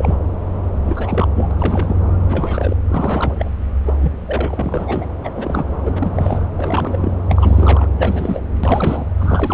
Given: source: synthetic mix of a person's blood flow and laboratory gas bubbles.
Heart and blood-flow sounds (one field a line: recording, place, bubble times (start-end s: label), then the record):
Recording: Doppler ultrasound of blood flow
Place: subclavian vein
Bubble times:
0.00-0.17 s: bubbles
0.86-1.28 s: bubbles
1.35-2.01 s: bubbles
2.27-2.77 s: bubbles
2.88-3.50 s: bubbles
3.86-3.94 s: bubbles
4.01-4.13 s: bubbles
4.25-5.05 s: bubbles
5.24-5.30 s: bubbles
5.33-5.65 s: bubbles
5.85-6.39 s: bubbles
6.57-7.12 s: bubbles
7.29-7.88 s: bubbles
7.98-8.41 s: bubbles
8.63-9.04 s: bubbles
9.19-9.54 s: bubbles
From the record:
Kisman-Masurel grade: 342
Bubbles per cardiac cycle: rolling drumbeat, 9 or more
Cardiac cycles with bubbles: 100%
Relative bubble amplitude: moderate (0.250 to 0.450)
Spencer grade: 3 (all of the cardiac periods contain showers or single bubble signals, but not dominating or overriding the cardiac motion signals)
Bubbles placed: anywhere in the cardiac cycle